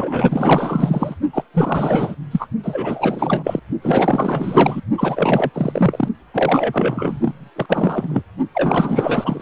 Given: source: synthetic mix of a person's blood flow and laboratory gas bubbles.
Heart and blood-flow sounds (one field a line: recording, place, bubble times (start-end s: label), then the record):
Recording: Doppler ultrasound of blood flow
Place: precordium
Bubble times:
0.00-1.15 s: bubbles
1.33-1.44 s: bubbles
1.54-2.15 s: bubbles
2.31-2.47 s: bubbles
2.63-3.60 s: bubbles
3.81-4.81 s: bubbles
4.97-5.50 s: bubbles
5.53-6.08 s: bubbles
6.34-7.50 s: bubbles
7.55-7.66 s: bubbles
7.69-8.22 s: bubbles
8.54-9.41 s: bubbles
From the record:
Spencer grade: 4 (maximum detectable bubble signal sounding continuously throughout systole and diastole of every cardiac period, and overriding the amplitude of the normal cardiac signals)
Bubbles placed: only in the low amplitude regions of the cardiac cycle